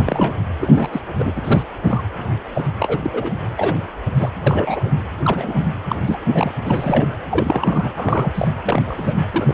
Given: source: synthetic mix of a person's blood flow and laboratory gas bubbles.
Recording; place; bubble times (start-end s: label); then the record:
Doppler ultrasound of blood flow; precordium
0.00-0.37 s: bubbles
0.60-1.01 s: bubbles
1.18-1.32 s: bubbles
1.35-1.63 s: bubbles
1.83-2.03 s: bubbles
2.54-2.69 s: bubbles
2.79-3.00 s: bubbles
3.03-3.32 s: bubbles
3.57-3.75 s: bubbles
4.17-4.30 s: bubbles
4.46-4.90 s: bubbles
5.23-5.67 s: bubbles
5.89-5.96 s: bubbles
6.05-6.18 s: bubbles
6.33-6.53 s: bubbles
6.65-7.17 s: bubbles
7.29-7.92 s: bubbles
7.96-8.31 s: bubbles
8.35-8.47 s: bubbles
8.63-9.14 s: bubbles
9.32-9.54 s: bubbles
From the record:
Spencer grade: 3 (all of the cardiac periods contain showers or single bubble signals, but not dominating or overriding the cardiac motion signals); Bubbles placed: anywhere in the cardiac cycle